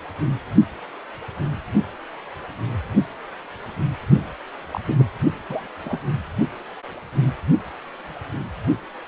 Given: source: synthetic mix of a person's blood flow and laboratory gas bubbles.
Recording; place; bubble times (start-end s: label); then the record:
Doppler ultrasound of blood flow; precordium
4.72-4.80 s: bubbles
4.87-4.95 s: bubbles
4.98-5.05 s: bubbles
5.49-5.67 s: bubbles
5.85-5.99 s: bubbles
From the record:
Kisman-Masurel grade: 211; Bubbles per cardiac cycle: several, 3 to 8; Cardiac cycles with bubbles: 1 to 10%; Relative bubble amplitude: barely perceptible (0.100 to 0.250); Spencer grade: 1 (occasional bubble signal discernible with the cardiac motion signal, with majority of cardiac periods free of bubbles); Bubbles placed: only in the low amplitude regions of the cardiac cycle